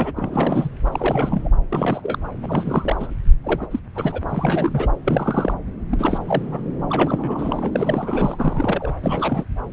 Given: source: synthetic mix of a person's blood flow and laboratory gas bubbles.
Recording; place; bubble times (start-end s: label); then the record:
Doppler ultrasound of blood flow; subclavian vein
0.00-0.13 s: bubbles
0.16-0.69 s: bubbles
0.85-1.49 s: bubbles
1.69-2.19 s: bubbles
2.43-3.13 s: bubbles
3.44-3.66 s: bubbles
3.71-3.79 s: bubbles
3.95-4.21 s: bubbles
4.29-4.93 s: bubbles
5.05-5.54 s: bubbles
5.91-6.19 s: bubbles
6.26-6.60 s: bubbles
6.90-8.94 s: bubbles
9.03-9.44 s: bubbles
From the record:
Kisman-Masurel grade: 342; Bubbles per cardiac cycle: rolling drumbeat, 9 or more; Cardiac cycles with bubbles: 100%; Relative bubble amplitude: moderate (0.250 to 0.450); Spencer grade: 3 (all of the cardiac periods contain showers or single bubble signals, but not dominating or overriding the cardiac motion signals); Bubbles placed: anywhere in the cardiac cycle